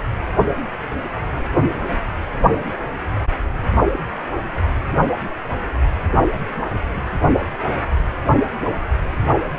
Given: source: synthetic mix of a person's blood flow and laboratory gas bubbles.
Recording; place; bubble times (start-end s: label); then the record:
Doppler ultrasound of blood flow; precordium
no bubbles
From the record:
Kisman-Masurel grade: 000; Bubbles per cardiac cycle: 0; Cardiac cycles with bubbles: 0%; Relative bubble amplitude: no bubbles discernible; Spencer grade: 0 (complete lack of bubble signals)